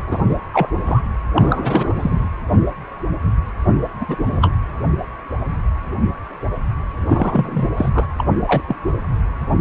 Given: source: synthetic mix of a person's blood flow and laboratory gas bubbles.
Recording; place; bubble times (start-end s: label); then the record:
Doppler ultrasound of blood flow; precordium
0.07-0.18 s: bubbles
0.29-0.36 s: bubbles
0.52-0.68 s: bubbles
0.85-1.02 s: bubbles
1.35-2.29 s: bubbles
4.00-4.05 s: bubbles
4.08-4.17 s: bubbles
4.26-4.54 s: bubbles
7.06-7.68 s: bubbles
7.76-7.90 s: bubbles
7.94-8.07 s: bubbles
8.18-8.25 s: bubbles
8.46-8.61 s: bubbles
8.68-8.76 s: bubbles
From the record:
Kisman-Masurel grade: 223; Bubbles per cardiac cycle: several, 3 to 8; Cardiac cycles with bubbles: 10 to 50%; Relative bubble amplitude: loud (0.450 to 0.775); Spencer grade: 2 (many but less than half of the cardiac periods contain bubble signals, singularly or in groups); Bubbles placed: anywhere in the cardiac cycle